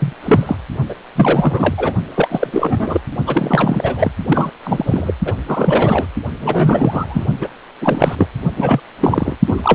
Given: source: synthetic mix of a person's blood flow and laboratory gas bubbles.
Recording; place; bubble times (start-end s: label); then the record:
Doppler ultrasound of blood flow; precordium
0.00-0.13 s: bubbles
0.23-0.57 s: bubbles
0.89-0.94 s: bubbles
1.15-1.94 s: bubbles
2.15-3.01 s: bubbles
3.26-4.12 s: bubbles
4.28-4.51 s: bubbles
4.63-5.13 s: bubbles
5.25-5.33 s: bubbles
5.47-6.06 s: bubbles
6.40-7.26 s: bubbles
7.40-7.48 s: bubbles
7.81-8.15 s: bubbles
8.18-8.27 s: bubbles
8.56-8.80 s: bubbles
9.00-9.35 s: bubbles
9.47-9.75 s: bubbles
From the record:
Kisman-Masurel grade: 343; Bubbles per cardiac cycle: rolling drumbeat, 9 or more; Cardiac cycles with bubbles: 100%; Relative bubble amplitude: loud (0.450 to 0.775); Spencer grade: 3 (all of the cardiac periods contain showers or single bubble signals, but not dominating or overriding the cardiac motion signals); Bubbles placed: only in the low amplitude regions of the cardiac cycle